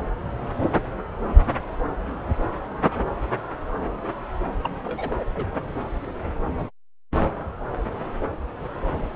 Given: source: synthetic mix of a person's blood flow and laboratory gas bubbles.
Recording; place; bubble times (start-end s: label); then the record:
Doppler ultrasound of blood flow; subclavian vein
4.63-4.71 s: bubbles
4.84-5.24 s: bubbles
5.34-5.48 s: bubbles
From the record:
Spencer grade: 2 (many but less than half of the cardiac periods contain bubble signals, singularly or in groups); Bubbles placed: anywhere in the cardiac cycle